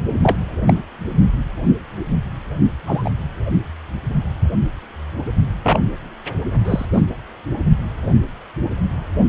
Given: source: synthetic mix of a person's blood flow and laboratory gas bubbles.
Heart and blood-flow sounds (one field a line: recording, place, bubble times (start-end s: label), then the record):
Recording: Doppler ultrasound of blood flow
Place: precordium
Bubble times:
0.22-0.38 s: bubbles
0.67-0.73 s: bubbles
2.87-3.10 s: bubbles
5.64-5.79 s: bubbles
6.64-6.85 s: bubbles
6.93-7.01 s: bubbles
From the record:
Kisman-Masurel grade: 123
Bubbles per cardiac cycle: 1 to 2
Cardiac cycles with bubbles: 10 to 50%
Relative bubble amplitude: loud (0.450 to 0.775)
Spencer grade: 2 (many but less than half of the cardiac periods contain bubble signals, singularly or in groups)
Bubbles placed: only in the low amplitude regions of the cardiac cycle